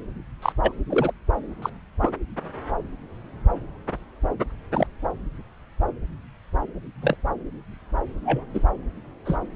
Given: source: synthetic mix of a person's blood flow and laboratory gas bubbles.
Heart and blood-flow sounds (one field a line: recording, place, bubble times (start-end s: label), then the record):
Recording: Doppler ultrasound of blood flow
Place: subclavian vein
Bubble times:
0.42-0.52 s: bubbles
0.62-0.72 s: bubbles
0.90-1.12 s: bubbles
1.62-1.70 s: bubbles
2.00-2.10 s: bubbles
4.71-4.87 s: bubbles
7.02-7.17 s: bubbles
8.24-8.48 s: bubbles
8.53-8.62 s: bubbles
9.25-9.38 s: bubbles
From the record:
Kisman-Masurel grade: 122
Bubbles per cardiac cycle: 1 to 2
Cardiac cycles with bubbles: 10 to 50%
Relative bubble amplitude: moderate (0.250 to 0.450)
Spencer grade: 2 (many but less than half of the cardiac periods contain bubble signals, singularly or in groups)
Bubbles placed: anywhere in the cardiac cycle